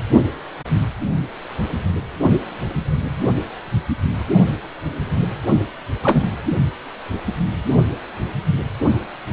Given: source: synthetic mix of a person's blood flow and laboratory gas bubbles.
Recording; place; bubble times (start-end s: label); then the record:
Doppler ultrasound of blood flow; precordium
6.03-6.21 s: bubbles
From the record:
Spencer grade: 1 (occasional bubble signal discernible with the cardiac motion signal, with majority of cardiac periods free of bubbles); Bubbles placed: anywhere in the cardiac cycle